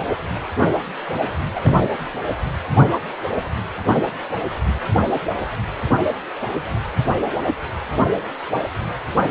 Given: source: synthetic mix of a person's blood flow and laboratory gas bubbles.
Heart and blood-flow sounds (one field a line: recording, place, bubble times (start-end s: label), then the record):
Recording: Doppler ultrasound of blood flow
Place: precordium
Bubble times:
1.55-1.90 s: bubbles
From the record:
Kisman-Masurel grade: 112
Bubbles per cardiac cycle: 1 to 2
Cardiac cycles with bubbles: 1 to 10%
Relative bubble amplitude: moderate (0.250 to 0.450)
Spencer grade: 1 (occasional bubble signal discernible with the cardiac motion signal, with majority of cardiac periods free of bubbles)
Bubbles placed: anywhere in the cardiac cycle